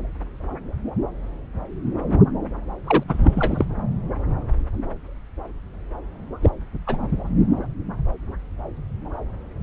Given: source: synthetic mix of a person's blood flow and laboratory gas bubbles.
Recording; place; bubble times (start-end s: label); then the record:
Doppler ultrasound of blood flow; subclavian vein
2.87-3.04 s: bubbles
3.08-3.65 s: bubbles
6.42-6.50 s: bubbles
6.87-6.98 s: bubbles
From the record:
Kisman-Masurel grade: 222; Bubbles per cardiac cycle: several, 3 to 8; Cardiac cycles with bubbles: 10 to 50%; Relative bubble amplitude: moderate (0.250 to 0.450); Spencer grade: 2 (many but less than half of the cardiac periods contain bubble signals, singularly or in groups); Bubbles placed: anywhere in the cardiac cycle